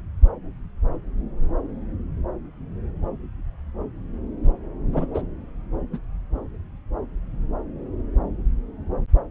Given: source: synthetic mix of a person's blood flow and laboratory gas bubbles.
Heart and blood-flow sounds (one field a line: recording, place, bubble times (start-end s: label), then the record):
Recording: Doppler ultrasound of blood flow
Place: subclavian vein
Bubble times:
4.92-5.07 s: bubbles
5.14-5.21 s: bubbles
5.93-6.00 s: bubbles
From the record:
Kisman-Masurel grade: 223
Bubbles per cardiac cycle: several, 3 to 8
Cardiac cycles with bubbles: 10 to 50%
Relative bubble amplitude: loud (0.450 to 0.775)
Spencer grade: 2 (many but less than half of the cardiac periods contain bubble signals, singularly or in groups)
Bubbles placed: anywhere in the cardiac cycle